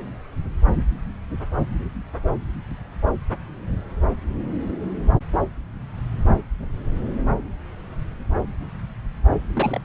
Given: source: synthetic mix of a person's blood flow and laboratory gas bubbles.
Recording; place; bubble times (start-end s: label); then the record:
Doppler ultrasound of blood flow; subclavian vein
9.55-9.80 s: bubbles
From the record:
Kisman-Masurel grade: 212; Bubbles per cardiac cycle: several, 3 to 8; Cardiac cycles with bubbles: 1 to 10%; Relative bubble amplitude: moderate (0.250 to 0.450); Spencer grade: 1 (occasional bubble signal discernible with the cardiac motion signal, with majority of cardiac periods free of bubbles); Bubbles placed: anywhere in the cardiac cycle